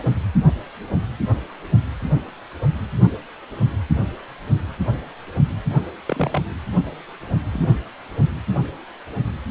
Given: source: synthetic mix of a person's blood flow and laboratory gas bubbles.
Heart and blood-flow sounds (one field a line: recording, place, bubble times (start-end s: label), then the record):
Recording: Doppler ultrasound of blood flow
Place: precordium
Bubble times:
6.05-6.42 s: bubbles
7.53-7.67 s: bubbles
From the record:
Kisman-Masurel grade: 122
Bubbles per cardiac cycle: 1 to 2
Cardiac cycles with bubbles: 10 to 50%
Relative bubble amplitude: moderate (0.250 to 0.450)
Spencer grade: 2 (many but less than half of the cardiac periods contain bubble signals, singularly or in groups)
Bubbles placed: anywhere in the cardiac cycle